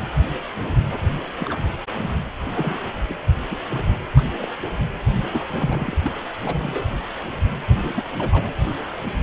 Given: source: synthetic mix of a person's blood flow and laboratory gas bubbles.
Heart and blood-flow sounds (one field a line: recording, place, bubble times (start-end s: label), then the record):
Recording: Doppler ultrasound of blood flow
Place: precordium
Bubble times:
1.38-1.58 s: bubbles
1.94-2.15 s: bubbles
2.54-2.79 s: bubbles
3.08-3.14 s: bubbles
3.50-3.56 s: bubbles
3.70-3.84 s: bubbles
4.15-4.35 s: bubbles
4.38-4.47 s: bubbles
5.33-5.43 s: bubbles
5.54-5.97 s: bubbles
6.04-6.12 s: bubbles
6.41-7.00 s: bubbles
7.70-7.93 s: bubbles
7.96-8.04 s: bubbles
8.18-8.54 s: bubbles
From the record:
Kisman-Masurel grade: 221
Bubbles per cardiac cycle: several, 3 to 8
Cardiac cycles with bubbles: 10 to 50%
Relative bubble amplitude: barely perceptible (0.100 to 0.250)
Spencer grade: 2 (many but less than half of the cardiac periods contain bubble signals, singularly or in groups)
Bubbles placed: anywhere in the cardiac cycle